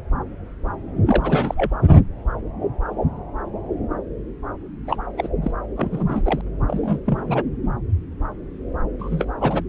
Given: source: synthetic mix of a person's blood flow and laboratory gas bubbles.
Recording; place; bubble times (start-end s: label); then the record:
Doppler ultrasound of blood flow; subclavian vein
1.06-1.79 s: bubbles
4.86-4.96 s: bubbles
5.17-5.28 s: bubbles
5.42-5.51 s: bubbles
5.76-6.22 s: bubbles
6.24-6.41 s: bubbles
6.67-6.99 s: bubbles
7.05-7.42 s: bubbles
8.99-9.26 s: bubbles
9.41-9.63 s: bubbles
From the record:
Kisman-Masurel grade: 232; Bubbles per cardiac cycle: several, 3 to 8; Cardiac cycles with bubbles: 50 to 99%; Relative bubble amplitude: moderate (0.250 to 0.450); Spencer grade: 3 (all of the cardiac periods contain showers or single bubble signals, but not dominating or overriding the cardiac motion signals); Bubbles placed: anywhere in the cardiac cycle